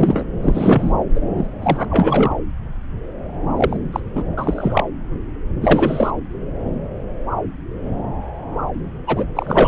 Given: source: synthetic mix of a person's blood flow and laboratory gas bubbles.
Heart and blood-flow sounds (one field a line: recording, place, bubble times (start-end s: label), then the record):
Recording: Doppler ultrasound of blood flow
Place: subclavian vein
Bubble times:
0.00-0.24 s: bubbles
0.41-0.92 s: bubbles
1.15-1.21 s: bubbles
1.36-1.48 s: bubbles
1.61-1.85 s: bubbles
1.90-2.34 s: bubbles
3.56-3.77 s: bubbles
3.92-4.00 s: bubbles
4.15-4.25 s: bubbles
4.37-4.83 s: bubbles
5.61-6.11 s: bubbles
9.06-9.25 s: bubbles
9.35-9.68 s: bubbles
From the record:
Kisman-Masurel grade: 233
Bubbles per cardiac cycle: several, 3 to 8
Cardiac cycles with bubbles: 50 to 99%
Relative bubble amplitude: loud (0.450 to 0.775)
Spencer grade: 3 (all of the cardiac periods contain showers or single bubble signals, but not dominating or overriding the cardiac motion signals)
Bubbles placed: anywhere in the cardiac cycle